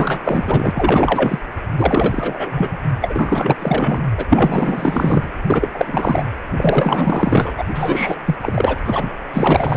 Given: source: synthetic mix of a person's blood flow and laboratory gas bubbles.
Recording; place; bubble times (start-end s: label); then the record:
Doppler ultrasound of blood flow; precordium
0.00-1.40 s: bubbles
1.78-2.77 s: bubbles
3.00-4.13 s: bubbles
4.17-4.25 s: bubbles
4.29-5.29 s: bubbles
5.46-5.70 s: bubbles
5.73-6.26 s: bubbles
6.51-7.64 s: bubbles
7.74-8.17 s: bubbles
8.26-8.36 s: bubbles
8.42-8.81 s: bubbles
8.84-9.12 s: bubbles
9.33-9.76 s: bubbles
From the record:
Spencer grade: 4 (maximum detectable bubble signal sounding continuously throughout systole and diastole of every cardiac period, and overriding the amplitude of the normal cardiac signals); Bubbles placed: anywhere in the cardiac cycle